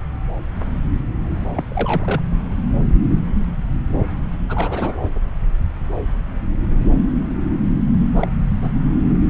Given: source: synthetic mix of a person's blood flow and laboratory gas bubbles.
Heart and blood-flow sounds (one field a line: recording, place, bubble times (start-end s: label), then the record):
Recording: Doppler ultrasound of blood flow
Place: subclavian vein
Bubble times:
1.54-1.64 s: bubbles
1.70-2.23 s: bubbles
4.49-5.00 s: bubbles
5.02-5.10 s: bubbles
8.15-8.28 s: bubbles
8.61-8.71 s: bubbles
From the record:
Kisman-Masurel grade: 221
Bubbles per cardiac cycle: several, 3 to 8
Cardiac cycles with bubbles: 10 to 50%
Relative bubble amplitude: barely perceptible (0.100 to 0.250)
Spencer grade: 2 (many but less than half of the cardiac periods contain bubble signals, singularly or in groups)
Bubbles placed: anywhere in the cardiac cycle